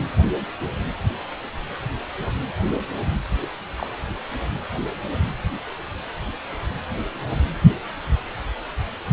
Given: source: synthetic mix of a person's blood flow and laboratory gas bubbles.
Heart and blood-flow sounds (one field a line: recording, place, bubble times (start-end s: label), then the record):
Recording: Doppler ultrasound of blood flow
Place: precordium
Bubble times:
3.41-3.47 s: bubbles
3.76-3.88 s: bubbles
From the record:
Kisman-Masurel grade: 121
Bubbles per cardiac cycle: 1 to 2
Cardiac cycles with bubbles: 10 to 50%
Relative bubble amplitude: barely perceptible (0.100 to 0.250)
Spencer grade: 2 (many but less than half of the cardiac periods contain bubble signals, singularly or in groups)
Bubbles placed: anywhere in the cardiac cycle